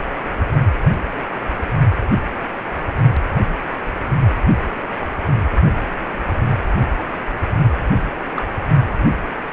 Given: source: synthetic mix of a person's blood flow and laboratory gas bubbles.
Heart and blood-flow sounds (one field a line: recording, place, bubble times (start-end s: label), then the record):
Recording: Doppler ultrasound of blood flow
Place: precordium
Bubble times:
8.36-8.43 s: bubbles
From the record:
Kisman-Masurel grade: 112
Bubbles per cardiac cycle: 1 to 2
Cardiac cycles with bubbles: 1 to 10%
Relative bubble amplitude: moderate (0.250 to 0.450)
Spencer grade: 1 (occasional bubble signal discernible with the cardiac motion signal, with majority of cardiac periods free of bubbles)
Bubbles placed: only in the low amplitude regions of the cardiac cycle